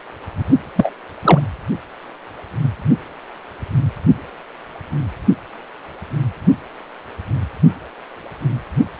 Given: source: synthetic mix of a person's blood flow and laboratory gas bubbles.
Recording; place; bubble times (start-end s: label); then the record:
Doppler ultrasound of blood flow; precordium
0.76-0.93 s: bubbles
1.22-1.40 s: bubbles
From the record:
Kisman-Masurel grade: 213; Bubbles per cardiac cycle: several, 3 to 8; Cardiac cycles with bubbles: 1 to 10%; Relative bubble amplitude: loud (0.450 to 0.775); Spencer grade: 1 (occasional bubble signal discernible with the cardiac motion signal, with majority of cardiac periods free of bubbles); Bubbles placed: only in the low amplitude regions of the cardiac cycle